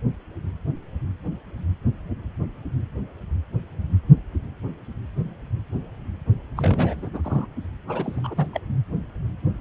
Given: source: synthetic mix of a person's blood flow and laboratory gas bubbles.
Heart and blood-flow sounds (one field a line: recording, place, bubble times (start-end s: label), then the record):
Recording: Doppler ultrasound of blood flow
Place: precordium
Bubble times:
6.57-7.10 s: bubbles
7.13-7.46 s: bubbles
7.88-8.48 s: bubbles
8.53-8.60 s: bubbles
From the record:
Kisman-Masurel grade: 221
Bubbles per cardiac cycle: several, 3 to 8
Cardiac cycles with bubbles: 10 to 50%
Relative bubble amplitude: barely perceptible (0.100 to 0.250)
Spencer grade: 2 (many but less than half of the cardiac periods contain bubble signals, singularly or in groups)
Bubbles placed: only in the low amplitude regions of the cardiac cycle